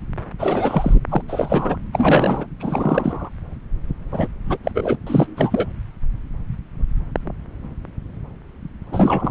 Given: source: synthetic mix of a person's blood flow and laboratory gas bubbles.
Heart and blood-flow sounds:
Doppler ultrasound of blood flow; subclavian vein
0.39-1.00 s: bubbles
1.09-1.22 s: bubbles
1.28-1.78 s: bubbles
1.92-2.46 s: bubbles
2.59-3.29 s: bubbles
4.12-4.28 s: bubbles
4.45-4.58 s: bubbles
4.63-4.71 s: bubbles
4.74-4.96 s: bubbles
5.07-5.66 s: bubbles
8.91-9.31 s: bubbles
From the record:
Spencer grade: 3 (all of the cardiac periods contain showers or single bubble signals, but not dominating or overriding the cardiac motion signals); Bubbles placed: anywhere in the cardiac cycle

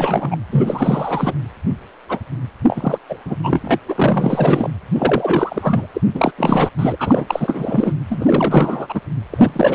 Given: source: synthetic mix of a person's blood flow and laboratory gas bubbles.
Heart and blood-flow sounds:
Doppler ultrasound of blood flow; precordium
0.00-0.38 s: bubbles
0.51-1.33 s: bubbles
2.08-2.19 s: bubbles
2.68-2.98 s: bubbles
3.08-3.18 s: bubbles
3.25-3.35 s: bubbles
3.43-3.77 s: bubbles
3.88-4.70 s: bubbles
4.94-5.87 s: bubbles
5.94-6.01 s: bubbles
6.14-6.32 s: bubbles
6.38-6.69 s: bubbles
6.79-6.96 s: bubbles
6.99-7.93 s: bubbles
8.10-9.00 s: bubbles
9.30-9.75 s: bubbles
From the record:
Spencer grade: 4 (maximum detectable bubble signal sounding continuously throughout systole and diastole of every cardiac period, and overriding the amplitude of the normal cardiac signals); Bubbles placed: anywhere in the cardiac cycle

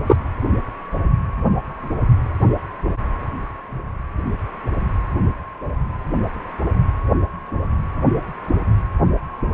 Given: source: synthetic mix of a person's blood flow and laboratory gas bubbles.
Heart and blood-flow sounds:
Doppler ultrasound of blood flow; precordium
0.06-0.16 s: bubbles
From the record:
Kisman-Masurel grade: 113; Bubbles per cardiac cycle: 1 to 2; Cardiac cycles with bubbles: 1 to 10%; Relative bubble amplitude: loud (0.450 to 0.775); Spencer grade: 1 (occasional bubble signal discernible with the cardiac motion signal, with majority of cardiac periods free of bubbles); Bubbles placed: anywhere in the cardiac cycle

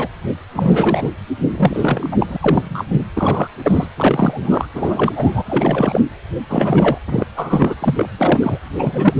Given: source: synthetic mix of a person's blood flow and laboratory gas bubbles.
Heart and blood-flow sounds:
Doppler ultrasound of blood flow; precordium
0.00-0.08 s: bubbles
0.55-1.10 s: bubbles
1.50-2.37 s: bubbles
2.41-2.85 s: bubbles
2.90-2.96 s: bubbles
2.99-3.04 s: bubbles
3.14-3.48 s: bubbles
3.63-3.87 s: bubbles
3.97-4.67 s: bubbles
4.74-5.13 s: bubbles
5.16-5.43 s: bubbles
5.46-6.01 s: bubbles
6.50-6.98 s: bubbles
7.08-7.26 s: bubbles
7.37-7.75 s: bubbles
7.81-8.09 s: bubbles
8.18-8.59 s: bubbles
8.72-9.16 s: bubbles
From the record:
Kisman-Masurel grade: 343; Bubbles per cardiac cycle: rolling drumbeat, 9 or more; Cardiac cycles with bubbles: 100%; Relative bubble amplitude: loud (0.450 to 0.775); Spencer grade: 3 (all of the cardiac periods contain showers or single bubble signals, but not dominating or overriding the cardiac motion signals); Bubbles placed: anywhere in the cardiac cycle

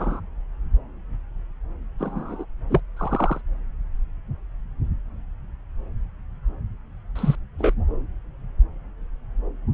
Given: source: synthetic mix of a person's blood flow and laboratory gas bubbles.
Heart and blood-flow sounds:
Doppler ultrasound of blood flow; subclavian vein
0.00-0.20 s: bubbles
2.00-2.46 s: bubbles
2.70-2.80 s: bubbles
2.96-3.41 s: bubbles
7.16-7.35 s: bubbles
7.58-7.73 s: bubbles
From the record:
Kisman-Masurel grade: 122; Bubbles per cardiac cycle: 1 to 2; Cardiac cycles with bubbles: 10 to 50%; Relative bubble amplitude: moderate (0.250 to 0.450); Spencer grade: 2 (many but less than half of the cardiac periods contain bubble signals, singularly or in groups); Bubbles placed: anywhere in the cardiac cycle

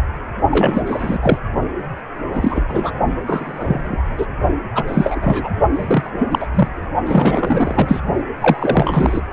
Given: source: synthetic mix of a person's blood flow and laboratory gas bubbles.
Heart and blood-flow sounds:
Doppler ultrasound of blood flow; precordium
0.50-1.18 s: bubbles
1.21-1.38 s: bubbles
2.33-2.62 s: bubbles
2.68-2.92 s: bubbles
3.27-4.03 s: bubbles
4.17-4.26 s: bubbles
4.75-4.83 s: bubbles
4.88-5.51 s: bubbles
5.73-6.11 s: bubbles
6.19-6.47 s: bubbles
6.54-6.68 s: bubbles
7.05-8.02 s: bubbles
8.40-9.21 s: bubbles
From the record:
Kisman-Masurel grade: 233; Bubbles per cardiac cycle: several, 3 to 8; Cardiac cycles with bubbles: 50 to 99%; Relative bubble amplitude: loud (0.450 to 0.775); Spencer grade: 3 (all of the cardiac periods contain showers or single bubble signals, but not dominating or overriding the cardiac motion signals); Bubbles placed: only in the low amplitude regions of the cardiac cycle

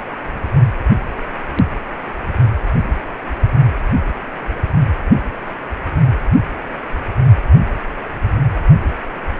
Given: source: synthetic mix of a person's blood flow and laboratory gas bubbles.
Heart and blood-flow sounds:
Doppler ultrasound of blood flow; precordium
no bubbles
From the record:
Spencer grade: 0 (complete lack of bubble signals)

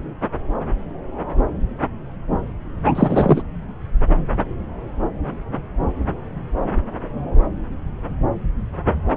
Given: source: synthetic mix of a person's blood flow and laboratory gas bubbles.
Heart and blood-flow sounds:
Doppler ultrasound of blood flow; subclavian vein
2.85-3.43 s: bubbles
From the record:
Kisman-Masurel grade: 213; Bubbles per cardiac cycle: several, 3 to 8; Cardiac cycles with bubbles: 1 to 10%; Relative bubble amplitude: loud (0.450 to 0.775); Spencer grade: 1 (occasional bubble signal discernible with the cardiac motion signal, with majority of cardiac periods free of bubbles); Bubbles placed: anywhere in the cardiac cycle

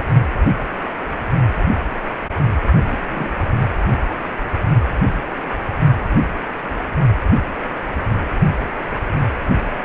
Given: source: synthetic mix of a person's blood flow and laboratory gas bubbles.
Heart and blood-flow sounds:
Doppler ultrasound of blood flow; precordium
2.83-3.31 s: bubbles
From the record:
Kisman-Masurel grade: 111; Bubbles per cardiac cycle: 1 to 2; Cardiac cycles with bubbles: 1 to 10%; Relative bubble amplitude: barely perceptible (0.100 to 0.250); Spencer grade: 1 (occasional bubble signal discernible with the cardiac motion signal, with majority of cardiac periods free of bubbles); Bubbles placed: only in the low amplitude regions of the cardiac cycle

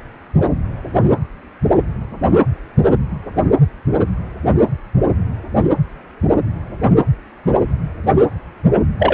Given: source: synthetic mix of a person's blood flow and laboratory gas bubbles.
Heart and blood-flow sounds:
Doppler ultrasound of blood flow; precordium
8.99-9.14 s: bubbles
From the record:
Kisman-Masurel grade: 113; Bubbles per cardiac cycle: 1 to 2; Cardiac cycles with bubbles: 1 to 10%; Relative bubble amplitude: loud (0.450 to 0.775); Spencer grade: 1 (occasional bubble signal discernible with the cardiac motion signal, with majority of cardiac periods free of bubbles); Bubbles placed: anywhere in the cardiac cycle

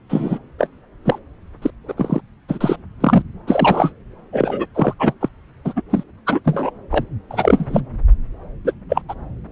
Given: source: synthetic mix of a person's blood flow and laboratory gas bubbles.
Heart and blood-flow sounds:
Doppler ultrasound of blood flow; subclavian vein
0.09-0.39 s: bubbles
0.58-0.67 s: bubbles
1.05-1.19 s: bubbles
1.62-1.71 s: bubbles
1.88-1.94 s: bubbles
1.97-2.21 s: bubbles
2.48-2.76 s: bubbles
3.00-3.22 s: bubbles
3.47-3.92 s: bubbles
4.33-4.66 s: bubbles
4.75-4.94 s: bubbles
4.99-5.13 s: bubbles
5.21-5.29 s: bubbles
5.65-5.73 s: bubbles
5.75-5.82 s: bubbles
5.90-6.04 s: bubbles
6.26-6.41 s: bubbles
6.44-6.71 s: bubbles
6.90-7.04 s: bubbles
7.30-7.82 s: bubbles
8.64-8.72 s: bubbles
8.89-9.02 s: bubbles
9.08-9.14 s: bubbles
From the record:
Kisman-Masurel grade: 243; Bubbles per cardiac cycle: several, 3 to 8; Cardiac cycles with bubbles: 100%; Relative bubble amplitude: loud (0.450 to 0.775); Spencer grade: 3 (all of the cardiac periods contain showers or single bubble signals, but not dominating or overriding the cardiac motion signals); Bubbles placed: anywhere in the cardiac cycle

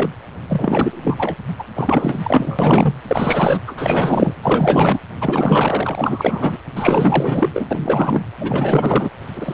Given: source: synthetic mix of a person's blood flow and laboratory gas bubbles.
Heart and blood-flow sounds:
Doppler ultrasound of blood flow; precordium
0.00-0.10 s: bubbles
0.49-1.36 s: bubbles
1.59-1.64 s: bubbles
1.75-2.19 s: bubbles
2.23-2.94 s: bubbles
3.08-3.60 s: bubbles
3.67-3.73 s: bubbles
3.77-4.34 s: bubbles
4.42-4.99 s: bubbles
5.20-6.57 s: bubbles
6.75-7.50 s: bubbles
7.53-7.67 s: bubbles
7.70-8.25 s: bubbles
8.40-9.11 s: bubbles
9.36-9.54 s: bubbles
From the record:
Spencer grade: 4 (maximum detectable bubble signal sounding continuously throughout systole and diastole of every cardiac period, and overriding the amplitude of the normal cardiac signals); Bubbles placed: anywhere in the cardiac cycle

